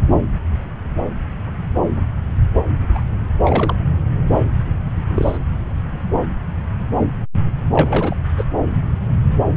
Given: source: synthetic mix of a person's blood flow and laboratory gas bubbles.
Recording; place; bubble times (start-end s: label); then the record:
Doppler ultrasound of blood flow; subclavian vein
2.95-3.01 s: bubbles
3.43-3.75 s: bubbles
5.06-5.38 s: bubbles
7.71-8.16 s: bubbles
8.38-8.45 s: bubbles
From the record:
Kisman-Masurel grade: 222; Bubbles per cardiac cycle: several, 3 to 8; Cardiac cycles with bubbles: 10 to 50%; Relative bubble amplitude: moderate (0.250 to 0.450); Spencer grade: 2 (many but less than half of the cardiac periods contain bubble signals, singularly or in groups); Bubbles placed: anywhere in the cardiac cycle